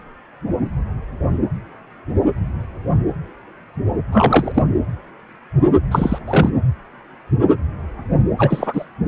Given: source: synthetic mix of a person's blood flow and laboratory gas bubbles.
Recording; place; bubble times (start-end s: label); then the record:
Doppler ultrasound of blood flow; precordium
4.12-4.62 s: bubbles
5.91-6.18 s: bubbles
6.28-6.50 s: bubbles
8.38-8.85 s: bubbles
From the record:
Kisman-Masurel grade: 223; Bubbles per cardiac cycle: several, 3 to 8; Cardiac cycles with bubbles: 10 to 50%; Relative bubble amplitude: loud (0.450 to 0.775); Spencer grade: 2 (many but less than half of the cardiac periods contain bubble signals, singularly or in groups); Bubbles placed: anywhere in the cardiac cycle